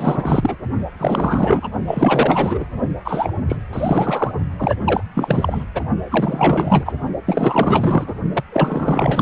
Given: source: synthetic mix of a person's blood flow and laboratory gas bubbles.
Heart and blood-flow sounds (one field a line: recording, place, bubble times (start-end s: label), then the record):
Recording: Doppler ultrasound of blood flow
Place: precordium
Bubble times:
0.00-0.57 s: bubbles
0.99-1.68 s: bubbles
1.87-2.66 s: bubbles
3.04-3.33 s: bubbles
3.48-3.57 s: bubbles
3.72-4.31 s: bubbles
4.58-4.76 s: bubbles
4.85-5.03 s: bubbles
5.15-5.65 s: bubbles
5.75-5.84 s: bubbles
6.11-6.93 s: bubbles
7.26-8.13 s: bubbles
8.33-8.43 s: bubbles
8.52-9.22 s: bubbles
From the record:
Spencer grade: 4 (maximum detectable bubble signal sounding continuously throughout systole and diastole of every cardiac period, and overriding the amplitude of the normal cardiac signals)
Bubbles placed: only in the low amplitude regions of the cardiac cycle